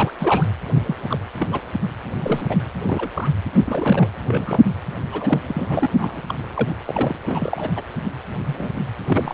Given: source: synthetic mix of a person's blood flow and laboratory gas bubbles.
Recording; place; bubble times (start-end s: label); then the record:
Doppler ultrasound of blood flow; precordium
0.00-0.11 s: bubbles
0.20-0.49 s: bubbles
0.85-0.96 s: bubbles
1.08-1.17 s: bubbles
1.39-1.61 s: bubbles
2.22-2.46 s: bubbles
2.49-2.57 s: bubbles
2.89-3.08 s: bubbles
3.14-3.29 s: bubbles
3.65-4.08 s: bubbles
4.27-4.77 s: bubbles
5.12-6.23 s: bubbles
6.28-6.35 s: bubbles
6.56-6.76 s: bubbles
6.86-7.18 s: bubbles
7.24-7.70 s: bubbles
7.75-7.83 s: bubbles
8.45-8.70 s: bubbles
8.74-8.82 s: bubbles
9.07-9.33 s: bubbles
From the record:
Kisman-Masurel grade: 242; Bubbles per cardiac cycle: several, 3 to 8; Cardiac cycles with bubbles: 100%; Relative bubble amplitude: moderate (0.250 to 0.450); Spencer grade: 3 (all of the cardiac periods contain showers or single bubble signals, but not dominating or overriding the cardiac motion signals); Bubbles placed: anywhere in the cardiac cycle